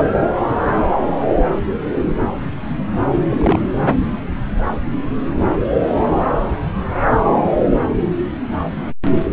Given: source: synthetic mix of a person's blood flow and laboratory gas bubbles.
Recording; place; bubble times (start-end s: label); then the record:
Doppler ultrasound of blood flow; subclavian vein
3.29-3.61 s: bubbles
From the record:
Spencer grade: 1 (occasional bubble signal discernible with the cardiac motion signal, with majority of cardiac periods free of bubbles); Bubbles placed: anywhere in the cardiac cycle